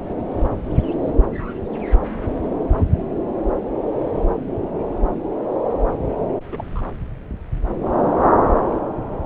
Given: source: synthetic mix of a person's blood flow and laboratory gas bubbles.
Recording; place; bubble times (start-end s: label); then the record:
Doppler ultrasound of blood flow; subclavian vein
0.18-0.23 s: bubbles
6.52-6.82 s: bubbles
From the record:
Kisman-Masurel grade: 121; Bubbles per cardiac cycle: 1 to 2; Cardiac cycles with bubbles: 10 to 50%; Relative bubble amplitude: barely perceptible (0.100 to 0.250); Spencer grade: 2 (many but less than half of the cardiac periods contain bubble signals, singularly or in groups); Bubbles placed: anywhere in the cardiac cycle